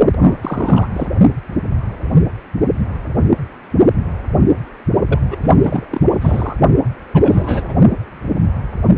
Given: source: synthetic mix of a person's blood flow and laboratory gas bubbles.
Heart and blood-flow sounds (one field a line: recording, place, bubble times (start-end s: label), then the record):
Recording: Doppler ultrasound of blood flow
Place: precordium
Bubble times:
0.19-0.37 s: bubbles
0.41-0.89 s: bubbles
0.93-1.07 s: bubbles
5.08-5.19 s: bubbles
5.30-5.84 s: bubbles
5.90-6.01 s: bubbles
6.21-6.56 s: bubbles
7.14-7.74 s: bubbles
From the record:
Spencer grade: 3 (all of the cardiac periods contain showers or single bubble signals, but not dominating or overriding the cardiac motion signals)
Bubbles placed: only in the low amplitude regions of the cardiac cycle